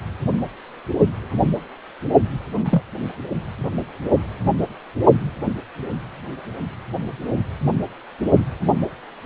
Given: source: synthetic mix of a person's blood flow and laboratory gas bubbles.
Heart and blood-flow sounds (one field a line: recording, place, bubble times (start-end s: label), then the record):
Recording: Doppler ultrasound of blood flow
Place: precordium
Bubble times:
2.60-2.82 s: bubbles
From the record:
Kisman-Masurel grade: 112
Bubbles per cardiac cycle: 1 to 2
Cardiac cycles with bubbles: 1 to 10%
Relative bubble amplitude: moderate (0.250 to 0.450)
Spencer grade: 1 (occasional bubble signal discernible with the cardiac motion signal, with majority of cardiac periods free of bubbles)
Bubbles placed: only in the low amplitude regions of the cardiac cycle